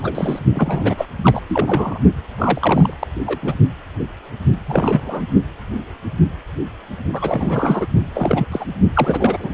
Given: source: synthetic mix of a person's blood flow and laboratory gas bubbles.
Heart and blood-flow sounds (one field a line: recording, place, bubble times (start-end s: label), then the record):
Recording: Doppler ultrasound of blood flow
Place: precordium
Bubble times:
0.00-0.39 s: bubbles
0.54-1.05 s: bubbles
1.23-1.41 s: bubbles
1.49-1.99 s: bubbles
2.38-2.94 s: bubbles
2.99-3.07 s: bubbles
3.26-3.39 s: bubbles
3.42-3.54 s: bubbles
4.66-5.25 s: bubbles
7.13-7.87 s: bubbles
8.06-8.47 s: bubbles
8.52-8.65 s: bubbles
8.94-9.50 s: bubbles
From the record:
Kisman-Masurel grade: 332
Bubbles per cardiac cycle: rolling drumbeat, 9 or more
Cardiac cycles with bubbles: 50 to 99%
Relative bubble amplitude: moderate (0.250 to 0.450)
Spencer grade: 3 (all of the cardiac periods contain showers or single bubble signals, but not dominating or overriding the cardiac motion signals)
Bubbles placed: only in the low amplitude regions of the cardiac cycle